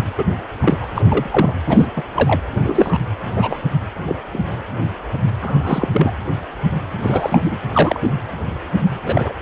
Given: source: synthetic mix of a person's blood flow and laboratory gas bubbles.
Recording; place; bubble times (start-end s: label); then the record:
Doppler ultrasound of blood flow; precordium
0.17-0.24 s: bubbles
0.62-0.84 s: bubbles
0.95-1.02 s: bubbles
1.09-1.54 s: bubbles
1.66-1.87 s: bubbles
1.95-2.02 s: bubbles
2.15-2.41 s: bubbles
2.63-2.98 s: bubbles
3.36-3.58 s: bubbles
4.06-4.15 s: bubbles
4.33-4.39 s: bubbles
5.42-5.88 s: bubbles
5.93-6.13 s: bubbles
7.02-7.40 s: bubbles
7.44-7.59 s: bubbles
7.72-8.13 s: bubbles
9.06-9.34 s: bubbles
From the record:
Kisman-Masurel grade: 233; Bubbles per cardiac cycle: several, 3 to 8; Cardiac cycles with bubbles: 50 to 99%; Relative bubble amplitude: loud (0.450 to 0.775); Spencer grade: 3 (all of the cardiac periods contain showers or single bubble signals, but not dominating or overriding the cardiac motion signals); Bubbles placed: anywhere in the cardiac cycle